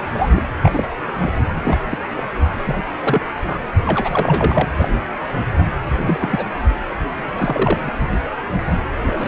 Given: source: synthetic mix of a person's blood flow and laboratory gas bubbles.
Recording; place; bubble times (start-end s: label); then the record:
Doppler ultrasound of blood flow; precordium
0.00-0.44 s: bubbles
0.62-0.86 s: bubbles
1.20-1.31 s: bubbles
1.64-1.79 s: bubbles
1.90-1.98 s: bubbles
2.17-2.23 s: bubbles
2.66-2.83 s: bubbles
3.04-3.21 s: bubbles
3.46-3.58 s: bubbles
3.85-4.68 s: bubbles
4.78-4.90 s: bubbles
5.21-5.51 s: bubbles
5.95-6.47 s: bubbles
7.16-7.79 s: bubbles
7.82-7.92 s: bubbles
9.00-9.28 s: bubbles
From the record:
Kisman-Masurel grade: 242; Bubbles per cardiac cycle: several, 3 to 8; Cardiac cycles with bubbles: 100%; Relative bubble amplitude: moderate (0.250 to 0.450); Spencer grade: 3 (all of the cardiac periods contain showers or single bubble signals, but not dominating or overriding the cardiac motion signals); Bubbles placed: anywhere in the cardiac cycle